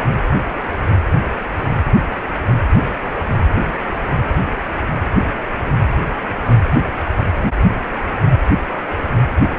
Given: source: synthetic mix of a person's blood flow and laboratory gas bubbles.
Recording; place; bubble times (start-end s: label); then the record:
Doppler ultrasound of blood flow; precordium
9.50-9.56 s: bubbles
From the record:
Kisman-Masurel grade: 111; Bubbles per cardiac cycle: 1 to 2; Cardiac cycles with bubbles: 1 to 10%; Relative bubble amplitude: barely perceptible (0.100 to 0.250); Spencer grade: 1 (occasional bubble signal discernible with the cardiac motion signal, with majority of cardiac periods free of bubbles); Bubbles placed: anywhere in the cardiac cycle